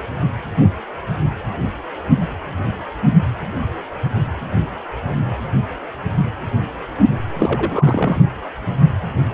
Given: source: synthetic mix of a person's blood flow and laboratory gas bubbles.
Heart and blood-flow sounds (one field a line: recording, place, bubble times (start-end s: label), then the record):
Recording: Doppler ultrasound of blood flow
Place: precordium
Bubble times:
7.39-8.21 s: bubbles
From the record:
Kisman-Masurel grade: 212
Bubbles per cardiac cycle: several, 3 to 8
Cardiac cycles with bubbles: 1 to 10%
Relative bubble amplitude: moderate (0.250 to 0.450)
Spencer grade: 1 (occasional bubble signal discernible with the cardiac motion signal, with majority of cardiac periods free of bubbles)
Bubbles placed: anywhere in the cardiac cycle